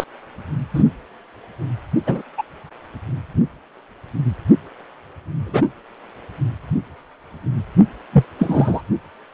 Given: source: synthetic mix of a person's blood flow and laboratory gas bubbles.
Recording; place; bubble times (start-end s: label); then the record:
Doppler ultrasound of blood flow; precordium
0.00-0.04 s: bubbles
0.74-0.84 s: bubbles
2.06-2.22 s: bubbles
2.38-2.43 s: bubbles
5.46-5.63 s: bubbles
8.12-8.24 s: bubbles
8.38-8.81 s: bubbles
From the record:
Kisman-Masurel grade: 123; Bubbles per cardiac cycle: 1 to 2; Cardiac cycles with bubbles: 10 to 50%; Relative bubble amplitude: loud (0.450 to 0.775); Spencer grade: 2 (many but less than half of the cardiac periods contain bubble signals, singularly or in groups); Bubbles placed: only in the low amplitude regions of the cardiac cycle